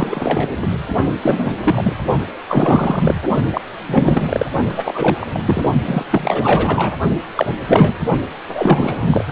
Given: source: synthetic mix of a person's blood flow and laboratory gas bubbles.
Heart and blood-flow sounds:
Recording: Doppler ultrasound of blood flow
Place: precordium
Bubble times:
0.00-0.68 s: bubbles
1.05-1.14 s: bubbles
1.22-1.53 s: bubbles
1.62-1.95 s: bubbles
2.48-3.14 s: bubbles
3.53-3.62 s: bubbles
3.88-4.47 s: bubbles
4.69-4.83 s: bubbles
4.85-5.40 s: bubbles
5.45-5.69 s: bubbles
5.84-6.05 s: bubbles
6.10-6.94 s: bubbles
7.35-7.54 s: bubbles
7.67-7.94 s: bubbles
8.48-9.24 s: bubbles
From the record:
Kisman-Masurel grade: 343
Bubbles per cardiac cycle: rolling drumbeat, 9 or more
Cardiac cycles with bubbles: 100%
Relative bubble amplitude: loud (0.450 to 0.775)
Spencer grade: 3 (all of the cardiac periods contain showers or single bubble signals, but not dominating or overriding the cardiac motion signals)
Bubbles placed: only in the low amplitude regions of the cardiac cycle

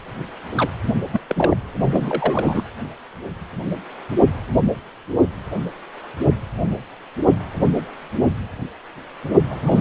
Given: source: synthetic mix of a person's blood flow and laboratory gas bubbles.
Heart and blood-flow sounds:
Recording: Doppler ultrasound of blood flow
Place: precordium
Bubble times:
0.55-0.69 s: bubbles
1.12-1.19 s: bubbles
1.29-1.57 s: bubbles
1.81-2.63 s: bubbles
9.48-9.55 s: bubbles
9.64-9.81 s: bubbles
From the record:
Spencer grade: 2 (many but less than half of the cardiac periods contain bubble signals, singularly or in groups)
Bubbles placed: anywhere in the cardiac cycle

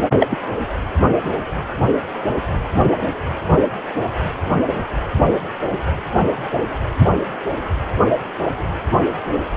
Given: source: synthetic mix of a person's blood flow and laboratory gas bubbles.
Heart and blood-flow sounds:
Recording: Doppler ultrasound of blood flow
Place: precordium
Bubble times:
0.18-0.27 s: bubbles
0.30-0.38 s: bubbles
From the record:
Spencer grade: 1 (occasional bubble signal discernible with the cardiac motion signal, with majority of cardiac periods free of bubbles)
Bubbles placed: anywhere in the cardiac cycle

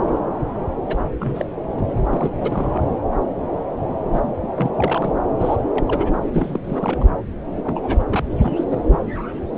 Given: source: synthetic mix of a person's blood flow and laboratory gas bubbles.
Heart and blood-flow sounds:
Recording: Doppler ultrasound of blood flow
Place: subclavian vein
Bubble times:
0.87-0.97 s: bubbles
1.19-1.46 s: bubbles
1.77-1.86 s: bubbles
1.98-2.29 s: bubbles
2.40-2.81 s: bubbles
4.12-4.21 s: bubbles
4.55-4.71 s: bubbles
4.77-5.10 s: bubbles
5.39-5.56 s: bubbles
5.72-6.14 s: bubbles
6.22-6.60 s: bubbles
6.63-7.07 s: bubbles
7.64-7.99 s: bubbles
8.08-8.24 s: bubbles
8.32-8.35 s: bubbles
8.38-8.68 s: bubbles
8.71-8.77 s: bubbles
8.85-8.97 s: bubbles
From the record:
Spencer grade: 3 (all of the cardiac periods contain showers or single bubble signals, but not dominating or overriding the cardiac motion signals)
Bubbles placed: anywhere in the cardiac cycle

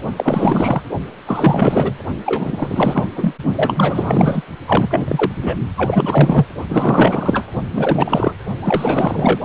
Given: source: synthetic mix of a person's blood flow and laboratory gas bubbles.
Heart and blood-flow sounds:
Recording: Doppler ultrasound of blood flow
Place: precordium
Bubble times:
0.17-0.82 s: bubbles
1.26-1.94 s: bubbles
2.25-3.08 s: bubbles
3.15-3.35 s: bubbles
3.53-4.42 s: bubbles
4.67-5.32 s: bubbles
5.42-5.56 s: bubbles
5.76-6.46 s: bubbles
6.69-7.48 s: bubbles
7.73-8.32 s: bubbles
8.62-9.39 s: bubbles
From the record:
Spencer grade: 4 (maximum detectable bubble signal sounding continuously throughout systole and diastole of every cardiac period, and overriding the amplitude of the normal cardiac signals)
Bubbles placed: only in the low amplitude regions of the cardiac cycle

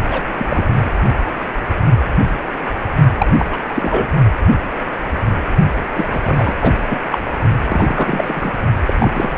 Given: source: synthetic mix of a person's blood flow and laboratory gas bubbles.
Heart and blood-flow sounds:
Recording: Doppler ultrasound of blood flow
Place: precordium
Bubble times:
0.11-0.22 s: bubbles
0.38-0.91 s: bubbles
3.19-3.31 s: bubbles
3.38-3.58 s: bubbles
3.69-4.08 s: bubbles
5.96-6.21 s: bubbles
6.23-6.55 s: bubbles
6.62-6.72 s: bubbles
6.90-6.99 s: bubbles
7.11-7.19 s: bubbles
7.67-8.51 s: bubbles
8.87-8.94 s: bubbles
8.99-9.11 s: bubbles
9.14-9.38 s: bubbles
From the record:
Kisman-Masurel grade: 233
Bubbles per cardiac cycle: several, 3 to 8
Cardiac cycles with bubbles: 50 to 99%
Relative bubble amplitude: loud (0.450 to 0.775)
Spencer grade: 3 (all of the cardiac periods contain showers or single bubble signals, but not dominating or overriding the cardiac motion signals)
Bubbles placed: only in the low amplitude regions of the cardiac cycle

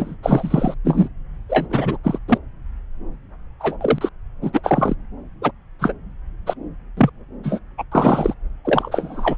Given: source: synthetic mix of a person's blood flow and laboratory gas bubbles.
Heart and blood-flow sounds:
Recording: Doppler ultrasound of blood flow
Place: subclavian vein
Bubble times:
0.00-0.16 s: bubbles
0.23-0.74 s: bubbles
0.84-1.08 s: bubbles
1.49-1.67 s: bubbles
1.70-1.98 s: bubbles
2.04-2.19 s: bubbles
2.28-2.38 s: bubbles
3.60-3.77 s: bubbles
3.80-4.09 s: bubbles
4.42-4.50 s: bubbles
4.53-4.61 s: bubbles
4.63-4.95 s: bubbles
5.42-5.51 s: bubbles
5.79-5.93 s: bubbles
6.46-6.54 s: bubbles
6.97-7.10 s: bubbles
7.43-7.59 s: bubbles
7.77-7.83 s: bubbles
7.92-8.34 s: bubbles
8.65-9.37 s: bubbles
From the record:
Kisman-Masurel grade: 233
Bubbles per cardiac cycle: several, 3 to 8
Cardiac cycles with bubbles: 50 to 99%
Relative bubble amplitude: loud (0.450 to 0.775)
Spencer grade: 3 (all of the cardiac periods contain showers or single bubble signals, but not dominating or overriding the cardiac motion signals)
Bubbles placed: anywhere in the cardiac cycle

